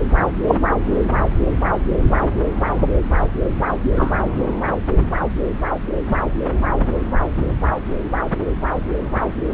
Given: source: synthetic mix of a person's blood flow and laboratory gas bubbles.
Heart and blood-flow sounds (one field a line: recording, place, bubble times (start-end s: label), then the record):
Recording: Doppler ultrasound of blood flow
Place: subclavian vein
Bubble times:
0.47-0.58 s: bubbles
3.96-4.13 s: bubbles
6.09-6.17 s: bubbles
From the record:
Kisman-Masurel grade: 123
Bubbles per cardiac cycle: 1 to 2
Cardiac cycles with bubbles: 10 to 50%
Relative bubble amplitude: loud (0.450 to 0.775)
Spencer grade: 2 (many but less than half of the cardiac periods contain bubble signals, singularly or in groups)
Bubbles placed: anywhere in the cardiac cycle